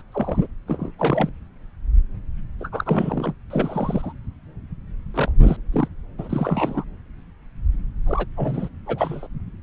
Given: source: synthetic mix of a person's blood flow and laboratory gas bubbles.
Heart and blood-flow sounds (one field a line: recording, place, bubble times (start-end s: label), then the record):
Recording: Doppler ultrasound of blood flow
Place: subclavian vein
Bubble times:
0.12-0.47 s: bubbles
0.68-0.91 s: bubbles
0.98-1.29 s: bubbles
2.60-2.69 s: bubbles
2.72-3.33 s: bubbles
3.50-4.12 s: bubbles
5.14-5.32 s: bubbles
5.42-5.57 s: bubbles
5.72-5.88 s: bubbles
6.18-6.84 s: bubbles
8.06-8.26 s: bubbles
8.37-8.69 s: bubbles
8.86-9.27 s: bubbles
From the record:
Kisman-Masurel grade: 232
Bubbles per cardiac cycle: several, 3 to 8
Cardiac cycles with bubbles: 50 to 99%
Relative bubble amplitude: moderate (0.250 to 0.450)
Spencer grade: 3 (all of the cardiac periods contain showers or single bubble signals, but not dominating or overriding the cardiac motion signals)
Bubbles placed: anywhere in the cardiac cycle